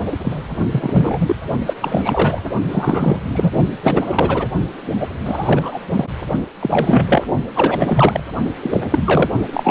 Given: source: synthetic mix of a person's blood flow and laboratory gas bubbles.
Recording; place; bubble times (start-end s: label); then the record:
Doppler ultrasound of blood flow; precordium
0.05-0.13 s: bubbles
0.24-0.36 s: bubbles
0.72-1.35 s: bubbles
1.66-1.75 s: bubbles
1.81-2.43 s: bubbles
2.71-3.20 s: bubbles
3.35-3.51 s: bubbles
3.83-4.47 s: bubbles
4.98-5.07 s: bubbles
5.24-5.81 s: bubbles
5.90-6.05 s: bubbles
6.59-7.24 s: bubbles
7.55-8.23 s: bubbles
8.62-8.80 s: bubbles
8.91-9.29 s: bubbles
9.53-9.71 s: bubbles
From the record:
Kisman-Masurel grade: 343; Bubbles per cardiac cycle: rolling drumbeat, 9 or more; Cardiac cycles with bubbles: 100%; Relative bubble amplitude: loud (0.450 to 0.775); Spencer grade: 3 (all of the cardiac periods contain showers or single bubble signals, but not dominating or overriding the cardiac motion signals); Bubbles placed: only in the low amplitude regions of the cardiac cycle